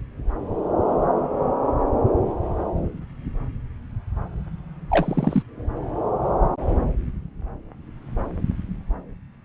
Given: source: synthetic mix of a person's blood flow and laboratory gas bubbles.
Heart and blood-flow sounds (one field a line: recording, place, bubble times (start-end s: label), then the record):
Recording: Doppler ultrasound of blood flow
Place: subclavian vein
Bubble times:
4.90-5.42 s: bubbles
From the record:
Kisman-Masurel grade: 212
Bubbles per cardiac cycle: several, 3 to 8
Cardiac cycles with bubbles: 1 to 10%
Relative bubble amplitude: moderate (0.250 to 0.450)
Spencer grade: 1 (occasional bubble signal discernible with the cardiac motion signal, with majority of cardiac periods free of bubbles)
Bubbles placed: anywhere in the cardiac cycle